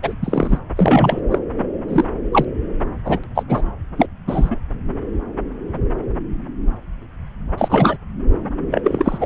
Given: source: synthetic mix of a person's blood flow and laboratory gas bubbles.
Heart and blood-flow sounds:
Doppler ultrasound of blood flow; subclavian vein
0.03-0.15 s: bubbles
0.22-0.58 s: bubbles
0.76-1.20 s: bubbles
1.31-1.39 s: bubbles
1.88-2.04 s: bubbles
2.32-2.45 s: bubbles
3.04-3.19 s: bubbles
3.23-3.27 s: bubbles
3.35-3.43 s: bubbles
3.48-3.62 s: bubbles
3.97-4.06 s: bubbles
4.27-4.57 s: bubbles
7.58-7.97 s: bubbles
8.71-9.26 s: bubbles
From the record:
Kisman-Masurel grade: 233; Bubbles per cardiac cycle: several, 3 to 8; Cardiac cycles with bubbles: 50 to 99%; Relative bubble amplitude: loud (0.450 to 0.775); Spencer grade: 3 (all of the cardiac periods contain showers or single bubble signals, but not dominating or overriding the cardiac motion signals); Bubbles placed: anywhere in the cardiac cycle

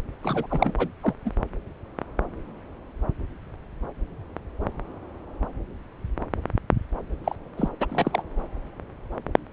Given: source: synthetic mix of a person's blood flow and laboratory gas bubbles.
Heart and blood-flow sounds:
Doppler ultrasound of blood flow; subclavian vein
0.23-0.47 s: bubbles
0.50-0.73 s: bubbles
0.77-0.88 s: bubbles
1.02-1.14 s: bubbles
1.25-1.31 s: bubbles
7.24-7.35 s: bubbles
7.58-7.70 s: bubbles
7.80-7.85 s: bubbles
7.89-8.22 s: bubbles
From the record:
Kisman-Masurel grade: 222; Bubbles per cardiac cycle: several, 3 to 8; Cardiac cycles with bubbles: 10 to 50%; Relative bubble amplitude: moderate (0.250 to 0.450); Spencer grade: 2 (many but less than half of the cardiac periods contain bubble signals, singularly or in groups); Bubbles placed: anywhere in the cardiac cycle

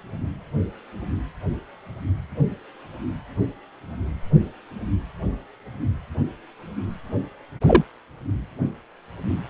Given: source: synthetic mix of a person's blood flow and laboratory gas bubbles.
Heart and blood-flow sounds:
Doppler ultrasound of blood flow; precordium
7.67-7.83 s: bubbles
From the record:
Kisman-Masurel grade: 123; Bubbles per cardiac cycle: 1 to 2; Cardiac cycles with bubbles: 10 to 50%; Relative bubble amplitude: loud (0.450 to 0.775); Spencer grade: 2 (many but less than half of the cardiac periods contain bubble signals, singularly or in groups); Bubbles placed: anywhere in the cardiac cycle

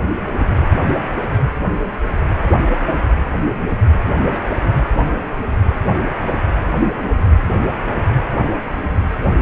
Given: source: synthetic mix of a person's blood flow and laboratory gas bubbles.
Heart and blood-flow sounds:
Doppler ultrasound of blood flow; precordium
4.18-4.44 s: bubbles
4.59-4.71 s: bubbles
From the record:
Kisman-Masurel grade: 211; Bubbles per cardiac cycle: several, 3 to 8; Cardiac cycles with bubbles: 1 to 10%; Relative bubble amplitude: barely perceptible (0.100 to 0.250); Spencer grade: 1 (occasional bubble signal discernible with the cardiac motion signal, with majority of cardiac periods free of bubbles); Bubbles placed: anywhere in the cardiac cycle

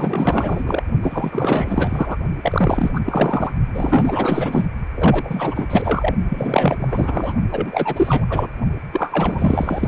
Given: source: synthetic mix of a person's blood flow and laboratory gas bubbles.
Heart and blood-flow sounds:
Doppler ultrasound of blood flow; precordium
0.00-0.82 s: bubbles
1.01-2.17 s: bubbles
2.43-3.01 s: bubbles
3.04-3.53 s: bubbles
3.74-4.66 s: bubbles
4.96-6.15 s: bubbles
6.29-6.76 s: bubbles
6.79-7.33 s: bubbles
7.51-8.26 s: bubbles
8.29-8.47 s: bubbles
8.93-9.88 s: bubbles
From the record:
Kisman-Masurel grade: 444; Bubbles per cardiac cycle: continuous sound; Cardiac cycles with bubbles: 100%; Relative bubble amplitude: maximal (0.775 to 0.999); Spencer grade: 4 (maximum detectable bubble signal sounding continuously throughout systole and diastole of every cardiac period, and overriding the amplitude of the normal cardiac signals); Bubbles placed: only in the low amplitude regions of the cardiac cycle

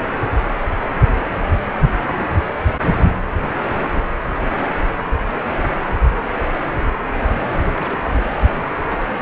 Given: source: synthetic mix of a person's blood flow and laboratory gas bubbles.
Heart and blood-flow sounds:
Doppler ultrasound of blood flow; precordium
7.58-8.13 s: bubbles
8.47-8.67 s: bubbles
8.89-9.06 s: bubbles
From the record:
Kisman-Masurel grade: 221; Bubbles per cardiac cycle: several, 3 to 8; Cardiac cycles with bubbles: 10 to 50%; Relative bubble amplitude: barely perceptible (0.100 to 0.250); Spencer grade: 2 (many but less than half of the cardiac periods contain bubble signals, singularly or in groups); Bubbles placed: anywhere in the cardiac cycle

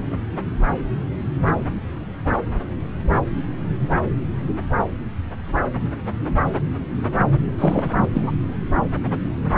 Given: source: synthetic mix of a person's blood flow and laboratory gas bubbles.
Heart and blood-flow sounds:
Doppler ultrasound of blood flow; subclavian vein
7.58-7.90 s: bubbles
8.02-8.09 s: bubbles
8.13-8.36 s: bubbles
From the record:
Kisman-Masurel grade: 213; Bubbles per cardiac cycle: several, 3 to 8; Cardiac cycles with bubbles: 1 to 10%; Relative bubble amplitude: loud (0.450 to 0.775); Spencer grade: 1 (occasional bubble signal discernible with the cardiac motion signal, with majority of cardiac periods free of bubbles); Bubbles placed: anywhere in the cardiac cycle

